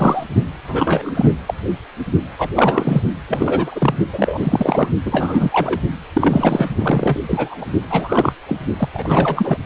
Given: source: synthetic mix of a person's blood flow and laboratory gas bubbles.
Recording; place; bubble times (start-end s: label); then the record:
Doppler ultrasound of blood flow; precordium
0.00-0.24 s: bubbles
0.68-1.33 s: bubbles
1.47-1.54 s: bubbles
2.38-2.50 s: bubbles
2.55-3.02 s: bubbles
3.28-3.94 s: bubbles
4.12-4.89 s: bubbles
5.05-5.80 s: bubbles
6.13-6.69 s: bubbles
6.79-7.20 s: bubbles
7.28-7.66 s: bubbles
7.90-8.32 s: bubbles
8.48-8.57 s: bubbles
8.77-8.88 s: bubbles
8.93-9.57 s: bubbles
From the record:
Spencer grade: 3 (all of the cardiac periods contain showers or single bubble signals, but not dominating or overriding the cardiac motion signals); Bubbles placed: only in the low amplitude regions of the cardiac cycle